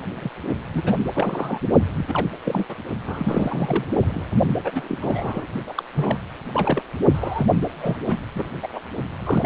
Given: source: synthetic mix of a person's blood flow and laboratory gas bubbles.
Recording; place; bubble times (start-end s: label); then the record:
Doppler ultrasound of blood flow; precordium
0.14-0.29 s: bubbles
0.69-0.82 s: bubbles
0.85-0.94 s: bubbles
1.15-1.60 s: bubbles
1.96-2.28 s: bubbles
2.44-2.65 s: bubbles
2.68-2.76 s: bubbles
3.06-3.84 s: bubbles
3.98-4.31 s: bubbles
4.64-4.97 s: bubbles
5.01-5.46 s: bubbles
5.67-5.83 s: bubbles
5.95-6.17 s: bubbles
6.52-6.82 s: bubbles
7.13-7.46 s: bubbles
7.60-7.98 s: bubbles
8.08-8.16 s: bubbles
8.35-8.49 s: bubbles
8.62-8.68 s: bubbles
8.72-8.81 s: bubbles
9.19-9.46 s: bubbles
From the record:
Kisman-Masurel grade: 342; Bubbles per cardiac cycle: rolling drumbeat, 9 or more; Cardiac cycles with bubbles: 100%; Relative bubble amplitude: moderate (0.250 to 0.450); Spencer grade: 3 (all of the cardiac periods contain showers or single bubble signals, but not dominating or overriding the cardiac motion signals); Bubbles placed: only in the low amplitude regions of the cardiac cycle